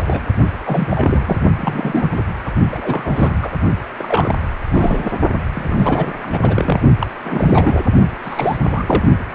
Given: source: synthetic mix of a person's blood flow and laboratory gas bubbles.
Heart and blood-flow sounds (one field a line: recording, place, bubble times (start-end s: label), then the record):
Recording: Doppler ultrasound of blood flow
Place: precordium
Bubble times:
0.00-0.22 s: bubbles
0.64-1.37 s: bubbles
1.55-2.23 s: bubbles
2.45-2.52 s: bubbles
2.72-3.50 s: bubbles
3.98-4.35 s: bubbles
4.73-5.12 s: bubbles
5.54-6.12 s: bubbles
6.22-6.80 s: bubbles
6.99-7.07 s: bubbles
7.25-7.82 s: bubbles
8.23-8.56 s: bubbles
8.66-9.03 s: bubbles
From the record:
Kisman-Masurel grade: 342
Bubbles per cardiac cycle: rolling drumbeat, 9 or more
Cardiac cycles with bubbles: 100%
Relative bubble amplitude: moderate (0.250 to 0.450)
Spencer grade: 3 (all of the cardiac periods contain showers or single bubble signals, but not dominating or overriding the cardiac motion signals)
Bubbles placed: only in the low amplitude regions of the cardiac cycle